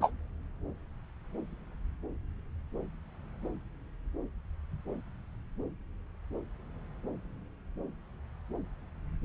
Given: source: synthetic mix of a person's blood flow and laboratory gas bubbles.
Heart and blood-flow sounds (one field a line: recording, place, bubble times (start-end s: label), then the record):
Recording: Doppler ultrasound of blood flow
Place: subclavian vein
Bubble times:
0.01-0.11 s: bubbles
From the record:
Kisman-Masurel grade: 112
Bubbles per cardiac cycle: 1 to 2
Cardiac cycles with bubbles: 1 to 10%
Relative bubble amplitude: moderate (0.250 to 0.450)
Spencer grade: 1 (occasional bubble signal discernible with the cardiac motion signal, with majority of cardiac periods free of bubbles)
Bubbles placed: anywhere in the cardiac cycle